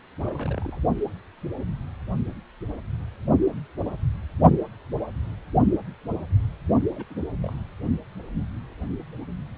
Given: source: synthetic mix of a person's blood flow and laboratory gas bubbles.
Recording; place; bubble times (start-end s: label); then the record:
Doppler ultrasound of blood flow; precordium
0.21-0.79 s: bubbles
6.96-7.04 s: bubbles
7.10-7.14 s: bubbles
7.42-7.52 s: bubbles
From the record:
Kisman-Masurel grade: 221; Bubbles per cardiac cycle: several, 3 to 8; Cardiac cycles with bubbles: 10 to 50%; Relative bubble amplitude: barely perceptible (0.100 to 0.250); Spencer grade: 2 (many but less than half of the cardiac periods contain bubble signals, singularly or in groups); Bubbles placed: only in the low amplitude regions of the cardiac cycle